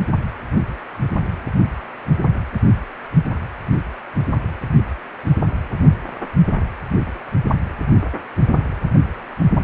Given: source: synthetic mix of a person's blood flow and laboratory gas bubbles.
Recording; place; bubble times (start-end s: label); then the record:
Doppler ultrasound of blood flow; precordium
no bubbles
From the record:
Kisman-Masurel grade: 000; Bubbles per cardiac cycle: 0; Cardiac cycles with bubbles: 0%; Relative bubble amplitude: no bubbles discernible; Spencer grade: 0 (complete lack of bubble signals)